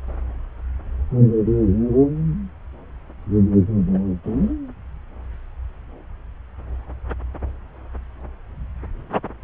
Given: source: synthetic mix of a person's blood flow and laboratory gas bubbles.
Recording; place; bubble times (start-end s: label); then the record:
Doppler ultrasound of blood flow; subclavian vein
3.94-4.03 s: bubbles
4.23-4.53 s: bubbles
From the record:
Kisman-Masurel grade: 121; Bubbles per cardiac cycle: 1 to 2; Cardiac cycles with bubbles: 10 to 50%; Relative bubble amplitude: barely perceptible (0.100 to 0.250); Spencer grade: 2 (many but less than half of the cardiac periods contain bubble signals, singularly or in groups); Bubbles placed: anywhere in the cardiac cycle